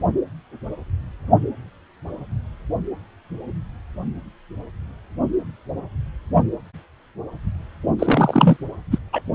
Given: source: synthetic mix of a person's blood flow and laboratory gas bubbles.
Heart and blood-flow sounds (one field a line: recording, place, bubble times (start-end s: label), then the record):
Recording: Doppler ultrasound of blood flow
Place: precordium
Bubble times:
7.99-8.57 s: bubbles
8.91-8.99 s: bubbles
9.12-9.21 s: bubbles
From the record:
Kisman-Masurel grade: 223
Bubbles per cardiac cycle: several, 3 to 8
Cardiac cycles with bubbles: 10 to 50%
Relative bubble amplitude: loud (0.450 to 0.775)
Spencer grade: 2 (many but less than half of the cardiac periods contain bubble signals, singularly or in groups)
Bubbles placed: only in the low amplitude regions of the cardiac cycle